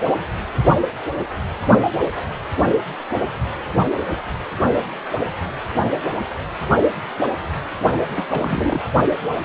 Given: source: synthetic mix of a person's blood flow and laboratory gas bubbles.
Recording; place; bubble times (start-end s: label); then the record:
Doppler ultrasound of blood flow; precordium
8.11-8.28 s: bubbles
8.31-8.81 s: bubbles
From the record:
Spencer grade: 1 (occasional bubble signal discernible with the cardiac motion signal, with majority of cardiac periods free of bubbles); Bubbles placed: only in the low amplitude regions of the cardiac cycle